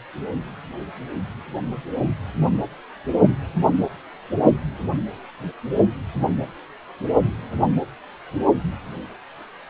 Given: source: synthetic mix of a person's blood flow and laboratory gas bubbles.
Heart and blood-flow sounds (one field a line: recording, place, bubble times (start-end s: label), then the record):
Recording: Doppler ultrasound of blood flow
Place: precordium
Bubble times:
no bubbles
From the record:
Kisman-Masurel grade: 000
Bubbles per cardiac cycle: 0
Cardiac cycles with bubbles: 0%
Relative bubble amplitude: no bubbles discernible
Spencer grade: 0 (complete lack of bubble signals)